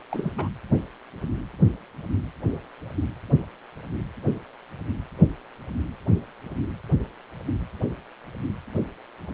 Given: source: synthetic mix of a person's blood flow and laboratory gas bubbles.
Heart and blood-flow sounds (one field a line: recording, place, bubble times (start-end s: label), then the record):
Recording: Doppler ultrasound of blood flow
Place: precordium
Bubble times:
0.11-0.32 s: bubbles
0.38-0.48 s: bubbles
From the record:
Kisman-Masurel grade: 221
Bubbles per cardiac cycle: several, 3 to 8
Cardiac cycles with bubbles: 10 to 50%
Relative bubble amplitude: barely perceptible (0.100 to 0.250)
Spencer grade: 2 (many but less than half of the cardiac periods contain bubble signals, singularly or in groups)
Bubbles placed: anywhere in the cardiac cycle